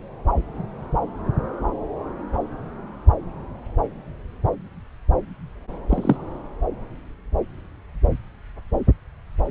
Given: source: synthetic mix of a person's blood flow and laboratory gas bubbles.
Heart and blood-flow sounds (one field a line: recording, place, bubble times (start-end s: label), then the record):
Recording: Doppler ultrasound of blood flow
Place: subclavian vein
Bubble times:
5.89-6.17 s: bubbles
From the record:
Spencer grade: 2 (many but less than half of the cardiac periods contain bubble signals, singularly or in groups)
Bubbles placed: anywhere in the cardiac cycle